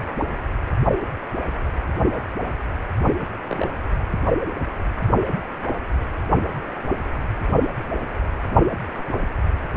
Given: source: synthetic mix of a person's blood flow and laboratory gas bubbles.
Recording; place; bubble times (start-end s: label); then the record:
Doppler ultrasound of blood flow; precordium
3.48-3.67 s: bubbles
From the record:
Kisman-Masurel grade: 111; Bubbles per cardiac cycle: 1 to 2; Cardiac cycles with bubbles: 1 to 10%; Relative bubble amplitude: barely perceptible (0.100 to 0.250); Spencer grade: 1 (occasional bubble signal discernible with the cardiac motion signal, with majority of cardiac periods free of bubbles); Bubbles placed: only in the low amplitude regions of the cardiac cycle